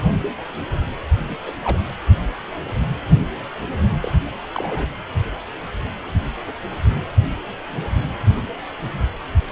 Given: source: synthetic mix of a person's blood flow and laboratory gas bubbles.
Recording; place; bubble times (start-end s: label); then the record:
Doppler ultrasound of blood flow; precordium
1.25-1.36 s: bubbles
1.46-1.54 s: bubbles
1.62-1.82 s: bubbles
4.01-4.12 s: bubbles
4.25-4.30 s: bubbles
4.54-4.90 s: bubbles
9.50-9.52 s: bubbles
From the record:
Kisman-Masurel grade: 221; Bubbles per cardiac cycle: several, 3 to 8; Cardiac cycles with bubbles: 10 to 50%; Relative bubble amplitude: barely perceptible (0.100 to 0.250); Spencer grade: 2 (many but less than half of the cardiac periods contain bubble signals, singularly or in groups); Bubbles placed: anywhere in the cardiac cycle